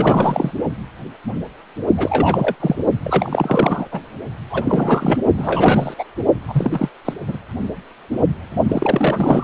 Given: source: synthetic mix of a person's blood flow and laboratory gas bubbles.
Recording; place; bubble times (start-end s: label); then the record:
Doppler ultrasound of blood flow; precordium
0.00-0.52 s: bubbles
1.97-2.55 s: bubbles
2.60-2.75 s: bubbles
3.03-3.87 s: bubbles
3.91-4.01 s: bubbles
4.50-5.19 s: bubbles
5.35-5.94 s: bubbles
5.98-6.04 s: bubbles
6.48-6.89 s: bubbles
7.04-7.14 s: bubbles
7.27-7.37 s: bubbles
8.68-9.44 s: bubbles
From the record:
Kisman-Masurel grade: 332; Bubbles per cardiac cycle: rolling drumbeat, 9 or more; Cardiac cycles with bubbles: 50 to 99%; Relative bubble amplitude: moderate (0.250 to 0.450); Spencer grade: 3 (all of the cardiac periods contain showers or single bubble signals, but not dominating or overriding the cardiac motion signals); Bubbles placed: only in the low amplitude regions of the cardiac cycle